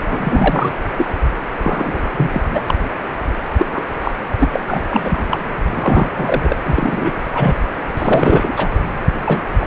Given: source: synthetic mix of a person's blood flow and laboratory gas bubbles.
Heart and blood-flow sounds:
Doppler ultrasound of blood flow; precordium
0.00-0.72 s: bubbles
0.97-1.08 s: bubbles
1.48-1.51 s: bubbles
1.60-2.41 s: bubbles
2.52-2.60 s: bubbles
2.66-2.75 s: bubbles
3.57-3.67 s: bubbles
3.71-3.88 s: bubbles
4.01-4.12 s: bubbles
4.40-4.60 s: bubbles
4.68-4.85 s: bubbles
4.89-5.24 s: bubbles
5.29-5.51 s: bubbles
5.70-6.56 s: bubbles
6.66-7.11 s: bubbles
7.34-7.56 s: bubbles
7.96-8.68 s: bubbles
9.22-9.54 s: bubbles
9.60-9.67 s: bubbles
From the record:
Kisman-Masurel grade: 343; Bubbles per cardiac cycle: rolling drumbeat, 9 or more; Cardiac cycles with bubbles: 100%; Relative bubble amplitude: loud (0.450 to 0.775); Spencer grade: 3 (all of the cardiac periods contain showers or single bubble signals, but not dominating or overriding the cardiac motion signals); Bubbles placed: anywhere in the cardiac cycle

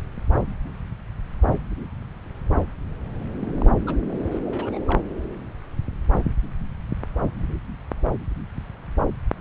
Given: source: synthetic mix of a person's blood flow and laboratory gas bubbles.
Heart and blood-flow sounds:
Doppler ultrasound of blood flow; subclavian vein
3.36-3.64 s: bubbles
3.67-3.75 s: bubbles
3.86-3.97 s: bubbles
4.08-4.39 s: bubbles
4.45-4.79 s: bubbles
4.88-4.99 s: bubbles
From the record:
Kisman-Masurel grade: 221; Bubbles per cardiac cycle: several, 3 to 8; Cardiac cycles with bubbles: 10 to 50%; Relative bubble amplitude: barely perceptible (0.100 to 0.250); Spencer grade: 2 (many but less than half of the cardiac periods contain bubble signals, singularly or in groups); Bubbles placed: anywhere in the cardiac cycle

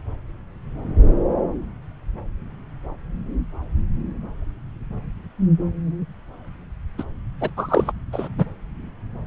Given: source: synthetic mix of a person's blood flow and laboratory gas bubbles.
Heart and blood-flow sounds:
Doppler ultrasound of blood flow; subclavian vein
6.97-7.04 s: bubbles
7.41-7.50 s: bubbles
7.57-7.92 s: bubbles
8.12-8.28 s: bubbles
8.38-8.46 s: bubbles
From the record:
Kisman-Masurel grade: 213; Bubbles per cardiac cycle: several, 3 to 8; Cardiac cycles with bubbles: 1 to 10%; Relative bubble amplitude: loud (0.450 to 0.775); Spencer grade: 1 (occasional bubble signal discernible with the cardiac motion signal, with majority of cardiac periods free of bubbles); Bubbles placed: anywhere in the cardiac cycle

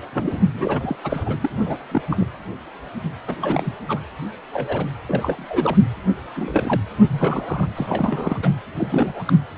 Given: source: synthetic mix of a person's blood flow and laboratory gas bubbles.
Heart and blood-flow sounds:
Doppler ultrasound of blood flow; precordium
0.12-0.39 s: bubbles
0.53-0.96 s: bubbles
1.04-1.34 s: bubbles
1.41-1.51 s: bubbles
1.65-1.78 s: bubbles
1.91-2.02 s: bubbles
2.10-2.27 s: bubbles
3.27-3.35 s: bubbles
3.42-3.75 s: bubbles
3.88-4.00 s: bubbles
4.51-4.86 s: bubbles
5.07-5.77 s: bubbles
6.34-6.80 s: bubbles
7.08-7.67 s: bubbles
7.76-8.38 s: bubbles
8.42-8.49 s: bubbles
8.77-9.23 s: bubbles
9.26-9.33 s: bubbles
From the record:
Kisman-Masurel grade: 232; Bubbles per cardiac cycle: several, 3 to 8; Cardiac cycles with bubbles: 50 to 99%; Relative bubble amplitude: moderate (0.250 to 0.450); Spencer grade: 3 (all of the cardiac periods contain showers or single bubble signals, but not dominating or overriding the cardiac motion signals); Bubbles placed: anywhere in the cardiac cycle

